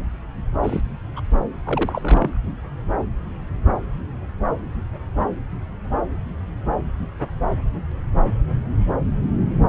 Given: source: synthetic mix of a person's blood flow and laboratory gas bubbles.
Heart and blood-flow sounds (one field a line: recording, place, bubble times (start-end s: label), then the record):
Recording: Doppler ultrasound of blood flow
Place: subclavian vein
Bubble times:
0.62-0.82 s: bubbles
1.16-1.21 s: bubbles
1.65-2.37 s: bubbles
From the record:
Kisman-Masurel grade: 222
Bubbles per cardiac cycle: several, 3 to 8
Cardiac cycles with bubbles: 10 to 50%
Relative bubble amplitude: moderate (0.250 to 0.450)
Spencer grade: 2 (many but less than half of the cardiac periods contain bubble signals, singularly or in groups)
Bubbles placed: anywhere in the cardiac cycle